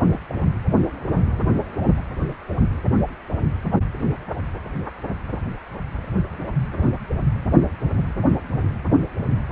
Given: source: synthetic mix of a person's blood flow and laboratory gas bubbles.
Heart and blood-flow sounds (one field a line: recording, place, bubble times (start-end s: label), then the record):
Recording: Doppler ultrasound of blood flow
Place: precordium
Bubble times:
0.06-0.19 s: bubbles
0.29-0.33 s: bubbles
0.40-0.46 s: bubbles
From the record:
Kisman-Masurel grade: 211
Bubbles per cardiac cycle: several, 3 to 8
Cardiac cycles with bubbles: 1 to 10%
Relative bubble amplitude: barely perceptible (0.100 to 0.250)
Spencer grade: 1 (occasional bubble signal discernible with the cardiac motion signal, with majority of cardiac periods free of bubbles)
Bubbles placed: anywhere in the cardiac cycle